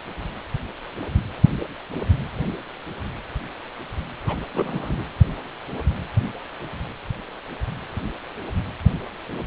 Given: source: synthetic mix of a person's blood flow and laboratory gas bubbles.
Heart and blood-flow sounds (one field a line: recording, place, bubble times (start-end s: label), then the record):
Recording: Doppler ultrasound of blood flow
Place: precordium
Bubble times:
4.25-4.45 s: bubbles
4.54-5.05 s: bubbles
From the record:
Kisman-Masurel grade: 211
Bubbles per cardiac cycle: several, 3 to 8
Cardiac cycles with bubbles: 1 to 10%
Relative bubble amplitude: barely perceptible (0.100 to 0.250)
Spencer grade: 1 (occasional bubble signal discernible with the cardiac motion signal, with majority of cardiac periods free of bubbles)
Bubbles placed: anywhere in the cardiac cycle